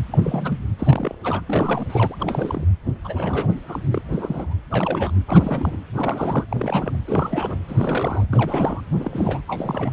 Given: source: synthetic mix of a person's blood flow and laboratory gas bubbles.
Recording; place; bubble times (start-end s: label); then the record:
Doppler ultrasound of blood flow; precordium
0.11-0.58 s: bubbles
0.79-1.15 s: bubbles
1.24-1.41 s: bubbles
1.47-1.85 s: bubbles
1.89-2.67 s: bubbles
3.04-3.54 s: bubbles
3.68-3.79 s: bubbles
3.91-4.02 s: bubbles
4.11-4.56 s: bubbles
4.71-5.11 s: bubbles
5.27-5.77 s: bubbles
5.94-6.45 s: bubbles
6.50-6.96 s: bubbles
7.07-7.58 s: bubbles
7.68-8.26 s: bubbles
8.32-8.80 s: bubbles
8.91-9.42 s: bubbles
9.47-9.93 s: bubbles
From the record:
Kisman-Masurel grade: 342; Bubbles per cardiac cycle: rolling drumbeat, 9 or more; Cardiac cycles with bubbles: 100%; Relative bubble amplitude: moderate (0.250 to 0.450); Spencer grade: 3 (all of the cardiac periods contain showers or single bubble signals, but not dominating or overriding the cardiac motion signals); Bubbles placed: anywhere in the cardiac cycle